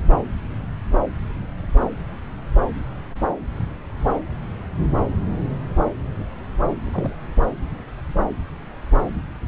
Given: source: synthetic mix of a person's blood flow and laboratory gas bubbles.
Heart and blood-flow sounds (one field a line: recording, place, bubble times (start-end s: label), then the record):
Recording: Doppler ultrasound of blood flow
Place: subclavian vein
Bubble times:
6.85-7.16 s: bubbles
From the record:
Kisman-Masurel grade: 112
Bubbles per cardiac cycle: 1 to 2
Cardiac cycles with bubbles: 1 to 10%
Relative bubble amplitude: moderate (0.250 to 0.450)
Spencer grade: 1 (occasional bubble signal discernible with the cardiac motion signal, with majority of cardiac periods free of bubbles)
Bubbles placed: anywhere in the cardiac cycle